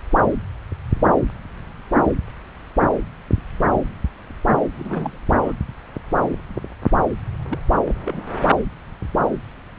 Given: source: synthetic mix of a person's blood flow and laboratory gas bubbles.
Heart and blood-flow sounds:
Doppler ultrasound of blood flow; subclavian vein
4.75-5.17 s: bubbles
5.34-5.52 s: bubbles
7.49-7.58 s: bubbles
7.71-7.77 s: bubbles
7.85-7.94 s: bubbles
8.01-8.24 s: bubbles
From the record:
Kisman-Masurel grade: 221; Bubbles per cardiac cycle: several, 3 to 8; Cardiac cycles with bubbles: 10 to 50%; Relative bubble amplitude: barely perceptible (0.100 to 0.250); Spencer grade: 2 (many but less than half of the cardiac periods contain bubble signals, singularly or in groups); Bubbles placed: anywhere in the cardiac cycle

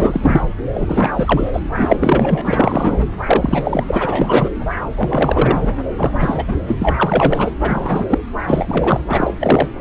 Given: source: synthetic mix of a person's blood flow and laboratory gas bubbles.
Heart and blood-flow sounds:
Doppler ultrasound of blood flow; subclavian vein
0.00-0.42 s: bubbles
0.74-1.10 s: bubbles
1.16-1.50 s: bubbles
1.52-1.60 s: bubbles
1.73-2.42 s: bubbles
2.45-3.00 s: bubbles
3.26-4.50 s: bubbles
4.96-5.74 s: bubbles
5.96-6.54 s: bubbles
6.67-6.76 s: bubbles
6.79-7.52 s: bubbles
7.61-8.05 s: bubbles
8.09-8.19 s: bubbles
8.47-9.00 s: bubbles
9.09-9.34 s: bubbles
9.40-9.68 s: bubbles
9.78-9.81 s: bubbles
From the record:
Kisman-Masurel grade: 343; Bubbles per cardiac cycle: rolling drumbeat, 9 or more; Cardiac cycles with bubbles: 100%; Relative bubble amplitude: loud (0.450 to 0.775); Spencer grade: 3 (all of the cardiac periods contain showers or single bubble signals, but not dominating or overriding the cardiac motion signals); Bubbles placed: anywhere in the cardiac cycle

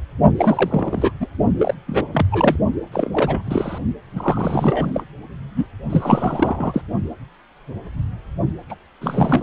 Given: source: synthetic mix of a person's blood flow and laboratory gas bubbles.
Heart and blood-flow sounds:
Doppler ultrasound of blood flow; precordium
0.36-1.11 s: bubbles
1.20-1.27 s: bubbles
1.59-1.74 s: bubbles
1.86-2.05 s: bubbles
2.13-2.26 s: bubbles
2.31-2.56 s: bubbles
2.92-3.79 s: bubbles
4.15-5.04 s: bubbles
5.56-5.67 s: bubbles
5.90-6.82 s: bubbles
8.69-8.76 s: bubbles
9.01-9.43 s: bubbles
From the record:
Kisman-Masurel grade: 332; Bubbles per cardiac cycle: rolling drumbeat, 9 or more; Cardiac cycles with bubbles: 50 to 99%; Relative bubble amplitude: moderate (0.250 to 0.450); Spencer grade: 3 (all of the cardiac periods contain showers or single bubble signals, but not dominating or overriding the cardiac motion signals); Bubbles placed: only in the low amplitude regions of the cardiac cycle

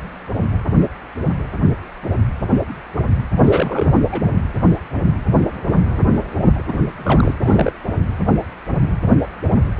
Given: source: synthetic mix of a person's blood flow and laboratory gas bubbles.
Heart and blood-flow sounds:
Doppler ultrasound of blood flow; precordium
3.35-3.92 s: bubbles
4.12-4.21 s: bubbles
6.58-7.34 s: bubbles
7.42-7.72 s: bubbles
From the record:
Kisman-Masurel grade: 222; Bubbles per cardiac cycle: several, 3 to 8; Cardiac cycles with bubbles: 10 to 50%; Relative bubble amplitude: moderate (0.250 to 0.450); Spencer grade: 2 (many but less than half of the cardiac periods contain bubble signals, singularly or in groups); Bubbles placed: anywhere in the cardiac cycle

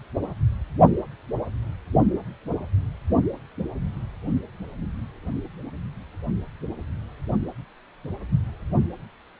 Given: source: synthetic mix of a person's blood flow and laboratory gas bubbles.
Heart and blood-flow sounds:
Doppler ultrasound of blood flow; precordium
no bubbles
From the record:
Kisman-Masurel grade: 000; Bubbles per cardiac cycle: 0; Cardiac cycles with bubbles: 0%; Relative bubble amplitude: no bubbles discernible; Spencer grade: 0 (complete lack of bubble signals)

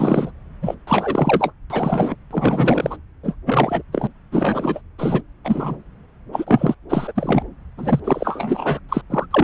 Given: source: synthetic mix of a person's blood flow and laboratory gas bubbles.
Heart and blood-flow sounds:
Doppler ultrasound of blood flow; subclavian vein
0.00-0.31 s: bubbles
0.62-0.74 s: bubbles
0.87-1.52 s: bubbles
1.70-2.15 s: bubbles
2.30-2.96 s: bubbles
3.23-3.34 s: bubbles
3.46-3.82 s: bubbles
3.92-4.07 s: bubbles
4.31-4.80 s: bubbles
4.98-5.21 s: bubbles
5.45-5.77 s: bubbles
6.32-6.75 s: bubbles
6.89-7.12 s: bubbles
7.15-7.42 s: bubbles
7.77-8.00 s: bubbles
8.04-8.79 s: bubbles
8.89-9.02 s: bubbles
9.10-9.26 s: bubbles
9.31-9.44 s: bubbles
From the record:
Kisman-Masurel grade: 333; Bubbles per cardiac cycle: rolling drumbeat, 9 or more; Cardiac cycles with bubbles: 50 to 99%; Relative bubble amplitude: loud (0.450 to 0.775); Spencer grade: 3 (all of the cardiac periods contain showers or single bubble signals, but not dominating or overriding the cardiac motion signals); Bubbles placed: anywhere in the cardiac cycle

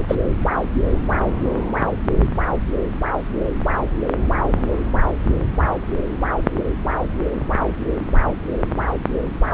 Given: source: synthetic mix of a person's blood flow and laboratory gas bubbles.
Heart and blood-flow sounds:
Doppler ultrasound of blood flow; subclavian vein
0.07-0.15 s: bubbles
From the record:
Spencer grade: 1 (occasional bubble signal discernible with the cardiac motion signal, with majority of cardiac periods free of bubbles); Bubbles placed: anywhere in the cardiac cycle

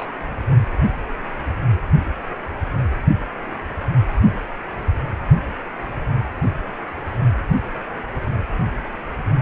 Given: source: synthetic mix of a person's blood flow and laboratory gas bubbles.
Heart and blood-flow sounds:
Doppler ultrasound of blood flow; precordium
0.00-0.09 s: bubbles
0.11-0.20 s: bubbles
From the record:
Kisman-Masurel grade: 111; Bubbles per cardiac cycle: 1 to 2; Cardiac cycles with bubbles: 1 to 10%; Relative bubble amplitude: barely perceptible (0.100 to 0.250); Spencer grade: 1 (occasional bubble signal discernible with the cardiac motion signal, with majority of cardiac periods free of bubbles); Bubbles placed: anywhere in the cardiac cycle

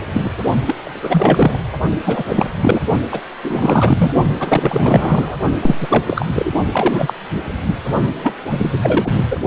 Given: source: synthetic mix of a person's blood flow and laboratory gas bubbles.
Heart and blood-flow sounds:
Doppler ultrasound of blood flow; precordium
0.12-0.30 s: bubbles
0.66-0.75 s: bubbles
0.83-1.60 s: bubbles
2.04-2.23 s: bubbles
2.29-2.50 s: bubbles
2.61-2.80 s: bubbles
3.11-3.21 s: bubbles
3.44-4.12 s: bubbles
4.39-5.36 s: bubbles
5.60-6.25 s: bubbles
6.34-6.51 s: bubbles
6.72-7.13 s: bubbles
7.66-7.75 s: bubbles
8.19-8.36 s: bubbles
8.48-8.79 s: bubbles
8.82-9.23 s: bubbles
9.30-9.37 s: bubbles
From the record:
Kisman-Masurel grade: 333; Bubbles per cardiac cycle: rolling drumbeat, 9 or more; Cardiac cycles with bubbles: 50 to 99%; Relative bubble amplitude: loud (0.450 to 0.775); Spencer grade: 3 (all of the cardiac periods contain showers or single bubble signals, but not dominating or overriding the cardiac motion signals); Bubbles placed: only in the low amplitude regions of the cardiac cycle

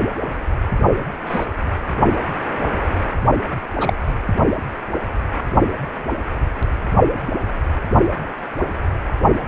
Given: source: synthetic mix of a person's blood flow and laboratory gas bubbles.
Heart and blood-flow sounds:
Doppler ultrasound of blood flow; precordium
0.85-1.10 s: bubbles
1.26-1.46 s: bubbles
3.80-3.93 s: bubbles
From the record:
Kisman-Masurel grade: 123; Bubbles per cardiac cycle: 1 to 2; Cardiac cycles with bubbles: 10 to 50%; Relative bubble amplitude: loud (0.450 to 0.775); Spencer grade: 2 (many but less than half of the cardiac periods contain bubble signals, singularly or in groups); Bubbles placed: only in the low amplitude regions of the cardiac cycle

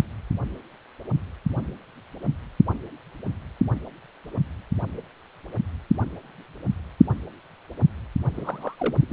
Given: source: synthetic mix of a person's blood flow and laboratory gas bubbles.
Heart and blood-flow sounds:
Doppler ultrasound of blood flow; precordium
8.33-8.96 s: bubbles
9.01-9.05 s: bubbles
9.10-9.12 s: bubbles
From the record:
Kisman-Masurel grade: 211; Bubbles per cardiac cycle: several, 3 to 8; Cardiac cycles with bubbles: 1 to 10%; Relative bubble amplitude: barely perceptible (0.100 to 0.250); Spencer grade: 1 (occasional bubble signal discernible with the cardiac motion signal, with majority of cardiac periods free of bubbles); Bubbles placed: anywhere in the cardiac cycle

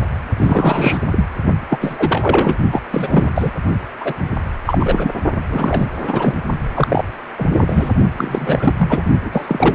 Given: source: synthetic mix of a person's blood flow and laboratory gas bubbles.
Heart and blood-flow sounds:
Doppler ultrasound of blood flow; precordium
0.36-0.99 s: bubbles
1.11-1.25 s: bubbles
1.70-2.58 s: bubbles
2.72-2.81 s: bubbles
2.92-3.29 s: bubbles
3.35-3.52 s: bubbles
4.00-4.13 s: bubbles
4.65-5.12 s: bubbles
5.49-5.87 s: bubbles
6.00-6.34 s: bubbles
6.74-7.04 s: bubbles
7.38-7.45 s: bubbles
7.50-7.94 s: bubbles
8.16-8.73 s: bubbles
8.78-9.07 s: bubbles
9.24-9.75 s: bubbles
From the record:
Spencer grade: 3 (all of the cardiac periods contain showers or single bubble signals, but not dominating or overriding the cardiac motion signals); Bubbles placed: only in the low amplitude regions of the cardiac cycle

